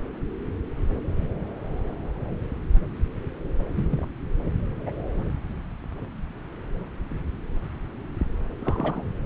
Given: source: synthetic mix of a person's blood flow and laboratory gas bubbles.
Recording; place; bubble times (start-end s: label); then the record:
Doppler ultrasound of blood flow; subclavian vein
3.75-4.08 s: bubbles
4.86-4.92 s: bubbles
8.60-9.04 s: bubbles
From the record:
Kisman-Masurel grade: 121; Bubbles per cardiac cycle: 1 to 2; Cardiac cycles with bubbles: 10 to 50%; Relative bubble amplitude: barely perceptible (0.100 to 0.250); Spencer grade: 2 (many but less than half of the cardiac periods contain bubble signals, singularly or in groups); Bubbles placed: anywhere in the cardiac cycle